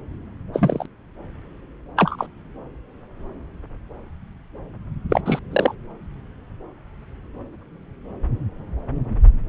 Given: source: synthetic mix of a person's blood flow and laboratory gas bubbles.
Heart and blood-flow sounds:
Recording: Doppler ultrasound of blood flow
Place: subclavian vein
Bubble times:
0.54-0.86 s: bubbles
1.96-2.26 s: bubbles
5.09-5.21 s: bubbles
5.25-5.39 s: bubbles
5.51-5.75 s: bubbles
From the record:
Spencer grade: 2 (many but less than half of the cardiac periods contain bubble signals, singularly or in groups)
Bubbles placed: anywhere in the cardiac cycle

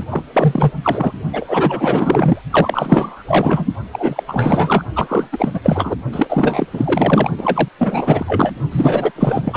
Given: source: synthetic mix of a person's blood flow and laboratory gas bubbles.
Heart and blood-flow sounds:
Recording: Doppler ultrasound of blood flow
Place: precordium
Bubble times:
0.00-0.04 s: bubbles
0.11-0.25 s: bubbles
0.33-0.73 s: bubbles
0.83-1.12 s: bubbles
1.33-2.42 s: bubbles
2.50-3.23 s: bubbles
3.27-3.66 s: bubbles
3.92-4.23 s: bubbles
4.28-4.84 s: bubbles
4.96-5.27 s: bubbles
5.32-5.60 s: bubbles
5.63-5.96 s: bubbles
6.12-6.67 s: bubbles
6.73-7.30 s: bubbles
7.38-7.69 s: bubbles
7.79-8.53 s: bubbles
8.71-9.11 s: bubbles
9.15-9.56 s: bubbles
From the record:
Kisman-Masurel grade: 444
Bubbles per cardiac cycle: continuous sound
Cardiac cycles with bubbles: 100%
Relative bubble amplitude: maximal (0.775 to 0.999)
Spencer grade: 4 (maximum detectable bubble signal sounding continuously throughout systole and diastole of every cardiac period, and overriding the amplitude of the normal cardiac signals)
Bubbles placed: only in the low amplitude regions of the cardiac cycle

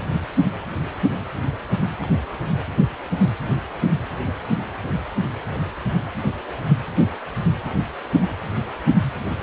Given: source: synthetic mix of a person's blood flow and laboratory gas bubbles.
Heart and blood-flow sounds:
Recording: Doppler ultrasound of blood flow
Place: precordium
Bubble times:
2.00-2.06 s: bubbles
From the record:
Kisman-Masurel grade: 111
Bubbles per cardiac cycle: 1 to 2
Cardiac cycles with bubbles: 1 to 10%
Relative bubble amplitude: barely perceptible (0.100 to 0.250)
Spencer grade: 1 (occasional bubble signal discernible with the cardiac motion signal, with majority of cardiac periods free of bubbles)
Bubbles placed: anywhere in the cardiac cycle

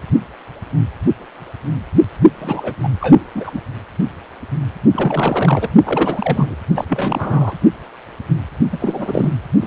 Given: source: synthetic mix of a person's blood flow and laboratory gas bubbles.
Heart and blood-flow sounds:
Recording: Doppler ultrasound of blood flow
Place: precordium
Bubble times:
2.42-2.75 s: bubbles
2.83-2.88 s: bubbles
3.00-3.25 s: bubbles
3.35-3.60 s: bubbles
4.92-5.69 s: bubbles
5.84-6.55 s: bubbles
6.75-6.84 s: bubbles
6.88-7.55 s: bubbles
8.72-8.78 s: bubbles
8.80-9.38 s: bubbles
9.59-9.67 s: bubbles
From the record:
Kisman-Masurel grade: 332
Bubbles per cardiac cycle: rolling drumbeat, 9 or more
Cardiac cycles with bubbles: 50 to 99%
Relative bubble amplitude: moderate (0.250 to 0.450)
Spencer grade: 3 (all of the cardiac periods contain showers or single bubble signals, but not dominating or overriding the cardiac motion signals)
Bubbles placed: only in the low amplitude regions of the cardiac cycle

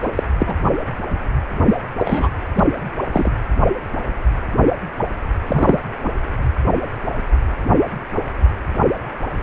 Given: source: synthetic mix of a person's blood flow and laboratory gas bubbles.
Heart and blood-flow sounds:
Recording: Doppler ultrasound of blood flow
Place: precordium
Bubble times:
0.02-0.10 s: bubbles
0.15-0.23 s: bubbles
0.39-0.55 s: bubbles
1.67-1.78 s: bubbles
1.99-2.29 s: bubbles
2.56-2.65 s: bubbles
3.12-3.31 s: bubbles
5.47-5.79 s: bubbles
6.03-6.11 s: bubbles
From the record:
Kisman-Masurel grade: 233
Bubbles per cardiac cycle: several, 3 to 8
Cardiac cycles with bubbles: 50 to 99%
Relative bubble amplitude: loud (0.450 to 0.775)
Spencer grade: 3 (all of the cardiac periods contain showers or single bubble signals, but not dominating or overriding the cardiac motion signals)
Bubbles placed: anywhere in the cardiac cycle

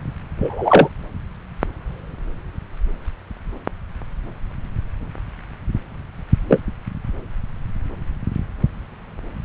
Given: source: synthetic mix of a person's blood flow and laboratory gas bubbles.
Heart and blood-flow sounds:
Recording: Doppler ultrasound of blood flow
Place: subclavian vein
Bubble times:
0.40-0.89 s: bubbles
6.49-6.60 s: bubbles
From the record:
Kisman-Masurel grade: 123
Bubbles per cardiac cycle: 1 to 2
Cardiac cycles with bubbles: 10 to 50%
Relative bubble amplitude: loud (0.450 to 0.775)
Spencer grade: 2 (many but less than half of the cardiac periods contain bubble signals, singularly or in groups)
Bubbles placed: anywhere in the cardiac cycle

